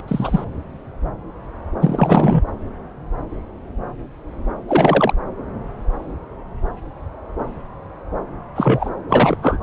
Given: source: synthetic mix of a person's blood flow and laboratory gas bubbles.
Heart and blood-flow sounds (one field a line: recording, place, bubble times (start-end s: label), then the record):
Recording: Doppler ultrasound of blood flow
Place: subclavian vein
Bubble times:
0.08-0.44 s: bubbles
1.80-2.42 s: bubbles
4.68-5.12 s: bubbles
8.55-8.90 s: bubbles
9.09-9.37 s: bubbles
9.42-9.58 s: bubbles
From the record:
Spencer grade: 2 (many but less than half of the cardiac periods contain bubble signals, singularly or in groups)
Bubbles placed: anywhere in the cardiac cycle